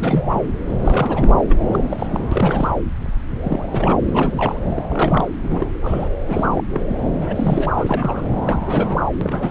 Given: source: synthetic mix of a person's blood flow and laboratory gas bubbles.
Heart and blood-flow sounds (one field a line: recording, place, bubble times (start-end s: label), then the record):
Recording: Doppler ultrasound of blood flow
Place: subclavian vein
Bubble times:
0.00-0.50 s: bubbles
0.67-0.75 s: bubbles
0.78-1.34 s: bubbles
1.49-1.64 s: bubbles
1.72-2.20 s: bubbles
2.31-2.73 s: bubbles
3.41-3.64 s: bubbles
3.71-3.98 s: bubbles
4.07-4.60 s: bubbles
4.69-4.85 s: bubbles
4.88-5.28 s: bubbles
5.42-5.73 s: bubbles
5.81-6.09 s: bubbles
6.26-6.64 s: bubbles
6.70-6.82 s: bubbles
6.88-6.97 s: bubbles
7.17-7.73 s: bubbles
7.77-8.27 s: bubbles
8.45-9.01 s: bubbles
9.21-9.51 s: bubbles
From the record:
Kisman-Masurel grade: 332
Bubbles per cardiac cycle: rolling drumbeat, 9 or more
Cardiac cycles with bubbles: 50 to 99%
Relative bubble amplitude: moderate (0.250 to 0.450)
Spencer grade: 3 (all of the cardiac periods contain showers or single bubble signals, but not dominating or overriding the cardiac motion signals)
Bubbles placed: anywhere in the cardiac cycle